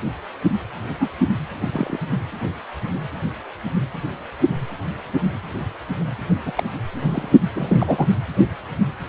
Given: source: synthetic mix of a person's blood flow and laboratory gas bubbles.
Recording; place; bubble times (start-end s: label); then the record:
Doppler ultrasound of blood flow; precordium
1.00-1.08 s: bubbles
1.20-1.25 s: bubbles
1.61-1.69 s: bubbles
1.73-1.97 s: bubbles
6.45-6.52 s: bubbles
6.55-6.63 s: bubbles
7.02-7.29 s: bubbles
7.54-8.08 s: bubbles
From the record:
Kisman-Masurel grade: 222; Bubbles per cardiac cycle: several, 3 to 8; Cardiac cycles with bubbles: 10 to 50%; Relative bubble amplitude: moderate (0.250 to 0.450); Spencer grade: 2 (many but less than half of the cardiac periods contain bubble signals, singularly or in groups); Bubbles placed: only in the low amplitude regions of the cardiac cycle